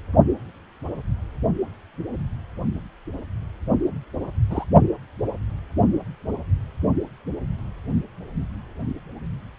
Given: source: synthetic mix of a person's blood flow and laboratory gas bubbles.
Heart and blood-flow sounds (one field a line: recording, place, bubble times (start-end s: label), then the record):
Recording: Doppler ultrasound of blood flow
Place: precordium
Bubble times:
4.50-4.64 s: bubbles
From the record:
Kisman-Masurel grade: 122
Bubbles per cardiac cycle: 1 to 2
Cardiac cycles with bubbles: 10 to 50%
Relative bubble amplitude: moderate (0.250 to 0.450)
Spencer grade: 2 (many but less than half of the cardiac periods contain bubble signals, singularly or in groups)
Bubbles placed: only in the low amplitude regions of the cardiac cycle